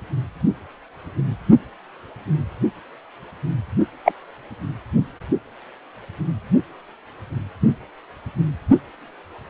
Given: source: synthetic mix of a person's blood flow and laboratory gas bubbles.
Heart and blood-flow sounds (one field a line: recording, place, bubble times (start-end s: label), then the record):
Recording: Doppler ultrasound of blood flow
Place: precordium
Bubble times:
4.04-4.12 s: bubbles
From the record:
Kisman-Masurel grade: 123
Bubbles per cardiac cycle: 1 to 2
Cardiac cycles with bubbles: 10 to 50%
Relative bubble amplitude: loud (0.450 to 0.775)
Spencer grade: 2 (many but less than half of the cardiac periods contain bubble signals, singularly or in groups)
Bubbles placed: only in the low amplitude regions of the cardiac cycle